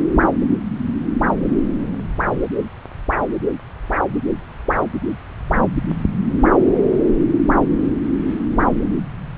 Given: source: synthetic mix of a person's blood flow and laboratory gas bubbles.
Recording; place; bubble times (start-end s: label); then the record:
Doppler ultrasound of blood flow; subclavian vein
no bubbles
From the record:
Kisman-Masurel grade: 000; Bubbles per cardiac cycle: 0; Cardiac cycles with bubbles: 0%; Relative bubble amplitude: no bubbles discernible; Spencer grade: 0 (complete lack of bubble signals)